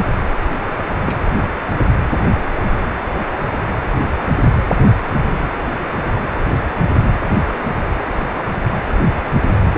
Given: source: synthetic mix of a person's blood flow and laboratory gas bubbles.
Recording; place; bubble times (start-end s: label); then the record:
Doppler ultrasound of blood flow; precordium
1.05-1.19 s: bubbles
From the record:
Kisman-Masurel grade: 112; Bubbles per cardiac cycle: 1 to 2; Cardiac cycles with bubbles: 1 to 10%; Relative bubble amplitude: moderate (0.250 to 0.450); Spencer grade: 1 (occasional bubble signal discernible with the cardiac motion signal, with majority of cardiac periods free of bubbles); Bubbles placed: anywhere in the cardiac cycle